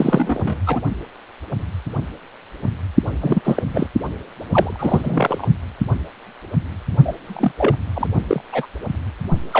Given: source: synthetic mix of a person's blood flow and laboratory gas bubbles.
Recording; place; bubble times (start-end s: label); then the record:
Doppler ultrasound of blood flow; precordium
0.00-0.60 s: bubbles
0.65-0.81 s: bubbles
3.21-3.62 s: bubbles
3.73-3.87 s: bubbles
4.51-5.46 s: bubbles
7.04-7.12 s: bubbles
7.27-7.51 s: bubbles
7.57-7.76 s: bubbles
7.95-8.08 s: bubbles
8.28-8.41 s: bubbles
8.52-8.66 s: bubbles
9.51-9.60 s: bubbles
From the record:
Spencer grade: 3 (all of the cardiac periods contain showers or single bubble signals, but not dominating or overriding the cardiac motion signals); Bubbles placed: only in the low amplitude regions of the cardiac cycle